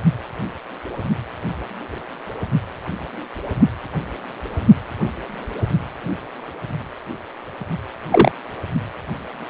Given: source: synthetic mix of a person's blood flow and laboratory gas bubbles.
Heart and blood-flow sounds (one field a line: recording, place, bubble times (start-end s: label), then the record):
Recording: Doppler ultrasound of blood flow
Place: precordium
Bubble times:
8.11-8.32 s: bubbles
From the record:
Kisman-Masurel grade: 113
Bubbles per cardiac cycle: 1 to 2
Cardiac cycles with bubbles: 1 to 10%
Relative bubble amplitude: loud (0.450 to 0.775)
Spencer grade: 1 (occasional bubble signal discernible with the cardiac motion signal, with majority of cardiac periods free of bubbles)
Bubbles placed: only in the low amplitude regions of the cardiac cycle